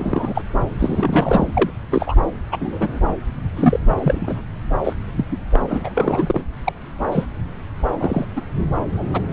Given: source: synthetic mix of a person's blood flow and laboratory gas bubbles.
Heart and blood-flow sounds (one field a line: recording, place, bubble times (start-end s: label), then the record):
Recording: Doppler ultrasound of blood flow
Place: subclavian vein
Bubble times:
0.01-0.42 s: bubbles
0.78-1.71 s: bubbles
1.91-2.16 s: bubbles
2.52-2.57 s: bubbles
2.60-3.00 s: bubbles
3.56-3.80 s: bubbles
3.96-4.42 s: bubbles
4.84-4.93 s: bubbles
5.16-5.25 s: bubbles
5.30-5.37 s: bubbles
5.52-5.62 s: bubbles
5.68-5.89 s: bubbles
5.96-6.41 s: bubbles
6.64-6.72 s: bubbles
7.11-7.26 s: bubbles
7.99-8.25 s: bubbles
8.36-8.41 s: bubbles
8.94-9.21 s: bubbles
9.29-9.33 s: bubbles
From the record:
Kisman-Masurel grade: 242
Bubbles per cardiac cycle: several, 3 to 8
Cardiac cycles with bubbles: 100%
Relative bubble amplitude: moderate (0.250 to 0.450)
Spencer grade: 3 (all of the cardiac periods contain showers or single bubble signals, but not dominating or overriding the cardiac motion signals)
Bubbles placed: anywhere in the cardiac cycle